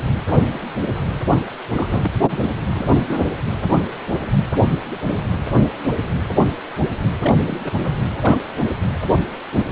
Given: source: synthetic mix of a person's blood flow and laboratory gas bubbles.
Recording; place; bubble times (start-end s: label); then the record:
Doppler ultrasound of blood flow; precordium
1.73-2.15 s: bubbles
2.26-2.49 s: bubbles
2.67-2.95 s: bubbles
3.10-3.26 s: bubbles
7.22-7.33 s: bubbles
7.46-7.60 s: bubbles
7.64-7.71 s: bubbles
7.83-7.91 s: bubbles
8.21-8.38 s: bubbles
From the record:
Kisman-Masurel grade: 222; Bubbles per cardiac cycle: several, 3 to 8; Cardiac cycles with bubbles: 10 to 50%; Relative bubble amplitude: moderate (0.250 to 0.450); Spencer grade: 2 (many but less than half of the cardiac periods contain bubble signals, singularly or in groups); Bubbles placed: anywhere in the cardiac cycle